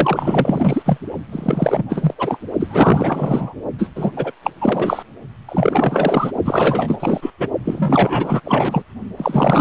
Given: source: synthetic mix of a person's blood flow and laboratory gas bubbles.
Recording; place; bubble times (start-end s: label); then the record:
Doppler ultrasound of blood flow; precordium
0.00-0.98 s: bubbles
1.31-2.14 s: bubbles
2.18-2.39 s: bubbles
2.60-3.54 s: bubbles
3.78-3.90 s: bubbles
3.95-4.12 s: bubbles
4.17-4.32 s: bubbles
4.42-4.50 s: bubbles
4.61-5.03 s: bubbles
5.49-6.32 s: bubbles
6.45-6.96 s: bubbles
7.00-7.31 s: bubbles
7.40-7.48 s: bubbles
7.64-8.40 s: bubbles
8.44-8.83 s: bubbles
9.17-9.61 s: bubbles
From the record:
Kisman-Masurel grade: 444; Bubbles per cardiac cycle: continuous sound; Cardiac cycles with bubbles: 100%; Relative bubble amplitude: maximal (0.775 to 0.999); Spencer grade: 4 (maximum detectable bubble signal sounding continuously throughout systole and diastole of every cardiac period, and overriding the amplitude of the normal cardiac signals); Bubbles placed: only in the low amplitude regions of the cardiac cycle